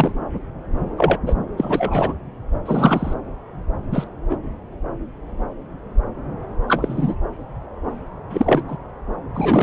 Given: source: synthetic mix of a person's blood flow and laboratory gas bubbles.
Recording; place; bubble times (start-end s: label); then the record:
Doppler ultrasound of blood flow; subclavian vein
0.00-0.13 s: bubbles
0.97-1.18 s: bubbles
1.26-1.35 s: bubbles
1.57-2.14 s: bubbles
2.66-3.14 s: bubbles
3.91-4.07 s: bubbles
4.29-4.36 s: bubbles
6.68-7.15 s: bubbles
8.29-8.63 s: bubbles
8.67-8.77 s: bubbles
9.34-9.63 s: bubbles
From the record:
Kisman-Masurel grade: 233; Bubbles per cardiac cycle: several, 3 to 8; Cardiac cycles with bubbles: 50 to 99%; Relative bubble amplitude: loud (0.450 to 0.775); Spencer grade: 3 (all of the cardiac periods contain showers or single bubble signals, but not dominating or overriding the cardiac motion signals); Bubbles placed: anywhere in the cardiac cycle